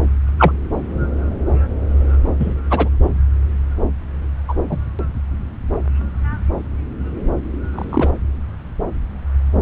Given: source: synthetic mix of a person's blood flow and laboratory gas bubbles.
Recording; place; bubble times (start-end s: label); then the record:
Doppler ultrasound of blood flow; subclavian vein
0.39-0.52 s: bubbles
2.39-2.54 s: bubbles
2.70-2.88 s: bubbles
4.48-4.54 s: bubbles
4.70-4.78 s: bubbles
7.72-8.10 s: bubbles
From the record:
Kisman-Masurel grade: 123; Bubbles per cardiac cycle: 1 to 2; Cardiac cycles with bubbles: 10 to 50%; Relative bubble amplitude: loud (0.450 to 0.775); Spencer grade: 2 (many but less than half of the cardiac periods contain bubble signals, singularly or in groups); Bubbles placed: anywhere in the cardiac cycle